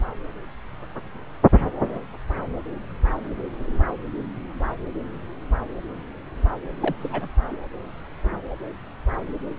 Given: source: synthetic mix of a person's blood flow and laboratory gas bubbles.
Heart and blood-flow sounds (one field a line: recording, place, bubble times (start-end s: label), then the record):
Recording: Doppler ultrasound of blood flow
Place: subclavian vein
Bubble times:
6.81-6.96 s: bubbles
6.99-7.29 s: bubbles
7.50-7.56 s: bubbles
From the record:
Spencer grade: 1 (occasional bubble signal discernible with the cardiac motion signal, with majority of cardiac periods free of bubbles)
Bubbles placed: anywhere in the cardiac cycle